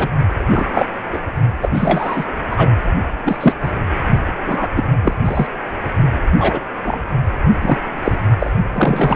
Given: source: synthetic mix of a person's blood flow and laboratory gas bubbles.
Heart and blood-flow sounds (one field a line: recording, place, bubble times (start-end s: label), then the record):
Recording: Doppler ultrasound of blood flow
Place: precordium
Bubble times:
0.00-0.08 s: bubbles
0.51-0.85 s: bubbles
1.12-1.20 s: bubbles
1.61-1.69 s: bubbles
1.74-2.25 s: bubbles
2.51-2.71 s: bubbles
3.25-3.54 s: bubbles
3.63-3.72 s: bubbles
4.46-4.68 s: bubbles
4.76-4.86 s: bubbles
5.02-5.14 s: bubbles
5.24-5.47 s: bubbles
6.38-6.62 s: bubbles
6.84-7.00 s: bubbles
7.61-7.78 s: bubbles
8.04-8.18 s: bubbles
8.39-8.50 s: bubbles
8.72-9.16 s: bubbles
From the record:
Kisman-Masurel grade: 243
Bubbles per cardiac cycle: several, 3 to 8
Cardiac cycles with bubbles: 100%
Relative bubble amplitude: loud (0.450 to 0.775)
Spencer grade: 3 (all of the cardiac periods contain showers or single bubble signals, but not dominating or overriding the cardiac motion signals)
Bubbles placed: only in the low amplitude regions of the cardiac cycle